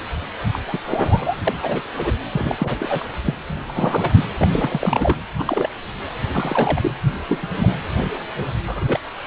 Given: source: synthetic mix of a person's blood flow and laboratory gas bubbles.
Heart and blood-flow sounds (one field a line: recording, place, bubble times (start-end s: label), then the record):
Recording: Doppler ultrasound of blood flow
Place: precordium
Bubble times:
0.53-0.58 s: bubbles
0.67-0.77 s: bubbles
0.83-1.41 s: bubbles
1.47-1.54 s: bubbles
1.62-1.81 s: bubbles
1.97-2.13 s: bubbles
2.32-2.76 s: bubbles
2.79-3.04 s: bubbles
3.25-3.34 s: bubbles
3.64-4.25 s: bubbles
4.41-4.47 s: bubbles
4.51-5.15 s: bubbles
5.37-5.69 s: bubbles
6.33-6.91 s: bubbles
7.28-7.48 s: bubbles
7.56-7.76 s: bubbles
8.67-8.98 s: bubbles
From the record:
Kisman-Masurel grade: 242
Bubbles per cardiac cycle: several, 3 to 8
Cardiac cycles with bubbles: 100%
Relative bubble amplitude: moderate (0.250 to 0.450)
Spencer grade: 3 (all of the cardiac periods contain showers or single bubble signals, but not dominating or overriding the cardiac motion signals)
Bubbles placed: anywhere in the cardiac cycle